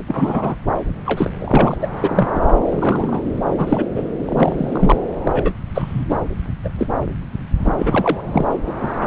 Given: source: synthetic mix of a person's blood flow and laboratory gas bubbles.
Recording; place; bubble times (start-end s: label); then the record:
Doppler ultrasound of blood flow; subclavian vein
0.08-0.55 s: bubbles
1.06-1.29 s: bubbles
1.39-1.77 s: bubbles
1.81-1.88 s: bubbles
1.94-2.28 s: bubbles
2.35-2.48 s: bubbles
2.70-3.23 s: bubbles
3.25-3.31 s: bubbles
3.58-3.86 s: bubbles
3.96-4.04 s: bubbles
4.26-4.96 s: bubbles
5.25-5.53 s: bubbles
5.75-6.05 s: bubbles
6.08-6.17 s: bubbles
6.64-6.69 s: bubbles
6.78-6.87 s: bubbles
7.64-7.73 s: bubbles
7.78-8.20 s: bubbles
8.26-8.46 s: bubbles
8.66-8.76 s: bubbles
8.81-8.89 s: bubbles
8.96-9.07 s: bubbles
From the record:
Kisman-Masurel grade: 242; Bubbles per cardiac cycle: several, 3 to 8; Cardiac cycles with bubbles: 100%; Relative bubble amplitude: moderate (0.250 to 0.450); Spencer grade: 3 (all of the cardiac periods contain showers or single bubble signals, but not dominating or overriding the cardiac motion signals); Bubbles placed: anywhere in the cardiac cycle